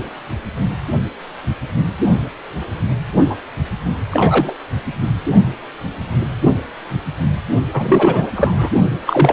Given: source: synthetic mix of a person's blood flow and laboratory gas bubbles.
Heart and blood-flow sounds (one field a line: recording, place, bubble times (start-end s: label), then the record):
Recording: Doppler ultrasound of blood flow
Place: precordium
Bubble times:
3.30-3.35 s: bubbles
4.10-4.54 s: bubbles
7.73-8.31 s: bubbles
8.36-8.69 s: bubbles
9.06-9.33 s: bubbles
From the record:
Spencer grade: 3 (all of the cardiac periods contain showers or single bubble signals, but not dominating or overriding the cardiac motion signals)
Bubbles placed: only in the low amplitude regions of the cardiac cycle